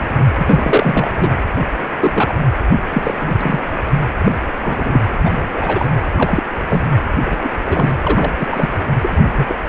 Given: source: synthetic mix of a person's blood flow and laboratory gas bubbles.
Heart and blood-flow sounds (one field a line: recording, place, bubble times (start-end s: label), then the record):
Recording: Doppler ultrasound of blood flow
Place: precordium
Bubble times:
0.00-0.24 s: bubbles
0.36-1.33 s: bubbles
2.00-2.12 s: bubbles
2.14-2.35 s: bubbles
2.93-3.14 s: bubbles
3.18-3.60 s: bubbles
4.24-4.32 s: bubbles
4.62-5.04 s: bubbles
5.24-5.49 s: bubbles
5.54-5.91 s: bubbles
6.14-6.42 s: bubbles
6.69-6.82 s: bubbles
7.25-7.36 s: bubbles
7.42-7.52 s: bubbles
7.67-7.96 s: bubbles
8.03-8.31 s: bubbles
8.39-8.47 s: bubbles
8.51-8.69 s: bubbles
9.03-9.24 s: bubbles
9.36-9.55 s: bubbles
From the record:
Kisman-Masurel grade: 243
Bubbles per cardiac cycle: several, 3 to 8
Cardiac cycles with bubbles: 100%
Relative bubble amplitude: loud (0.450 to 0.775)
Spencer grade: 3 (all of the cardiac periods contain showers or single bubble signals, but not dominating or overriding the cardiac motion signals)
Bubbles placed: anywhere in the cardiac cycle